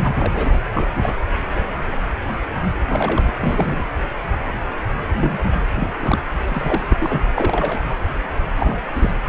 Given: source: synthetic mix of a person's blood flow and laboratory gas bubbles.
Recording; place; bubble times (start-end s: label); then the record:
Doppler ultrasound of blood flow; precordium
0.00-0.13 s: bubbles
0.19-0.59 s: bubbles
0.70-0.89 s: bubbles
0.95-1.14 s: bubbles
2.88-3.31 s: bubbles
3.38-3.82 s: bubbles
5.15-5.64 s: bubbles
5.75-5.93 s: bubbles
6.00-6.20 s: bubbles
6.45-6.96 s: bubbles
7.00-7.19 s: bubbles
7.35-7.82 s: bubbles
8.57-8.76 s: bubbles
8.95-9.12 s: bubbles
From the record:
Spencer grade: 3 (all of the cardiac periods contain showers or single bubble signals, but not dominating or overriding the cardiac motion signals); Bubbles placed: anywhere in the cardiac cycle